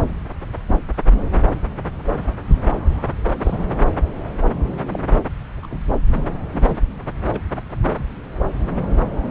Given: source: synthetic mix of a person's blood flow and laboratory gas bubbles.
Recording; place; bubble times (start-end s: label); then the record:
Doppler ultrasound of blood flow; subclavian vein
2.76-3.10 s: bubbles
3.29-3.36 s: bubbles
3.40-3.66 s: bubbles
4.92-4.99 s: bubbles
5.62-5.66 s: bubbles
5.71-5.79 s: bubbles
6.50-6.79 s: bubbles
7.32-7.41 s: bubbles
7.54-7.62 s: bubbles
From the record:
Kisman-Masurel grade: 221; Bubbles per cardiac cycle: several, 3 to 8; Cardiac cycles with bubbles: 10 to 50%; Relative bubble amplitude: barely perceptible (0.100 to 0.250); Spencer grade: 2 (many but less than half of the cardiac periods contain bubble signals, singularly or in groups); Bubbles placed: anywhere in the cardiac cycle